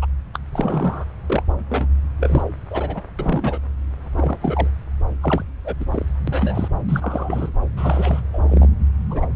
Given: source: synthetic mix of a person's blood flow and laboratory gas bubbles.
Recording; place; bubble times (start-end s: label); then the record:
Doppler ultrasound of blood flow; subclavian vein
0.01-0.07 s: bubbles
0.34-0.39 s: bubbles
0.51-1.05 s: bubbles
1.30-1.43 s: bubbles
1.69-1.88 s: bubbles
2.20-2.43 s: bubbles
2.70-3.01 s: bubbles
3.18-3.58 s: bubbles
4.17-4.38 s: bubbles
4.42-4.68 s: bubbles
5.21-5.44 s: bubbles
5.64-5.75 s: bubbles
5.79-5.85 s: bubbles
5.91-6.05 s: bubbles
6.27-6.68 s: bubbles
6.88-7.50 s: bubbles
7.76-8.21 s: bubbles
8.33-8.69 s: bubbles
9.10-9.26 s: bubbles
From the record:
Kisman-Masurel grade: 242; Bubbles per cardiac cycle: several, 3 to 8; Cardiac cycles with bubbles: 100%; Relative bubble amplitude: moderate (0.250 to 0.450); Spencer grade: 3 (all of the cardiac periods contain showers or single bubble signals, but not dominating or overriding the cardiac motion signals); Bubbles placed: anywhere in the cardiac cycle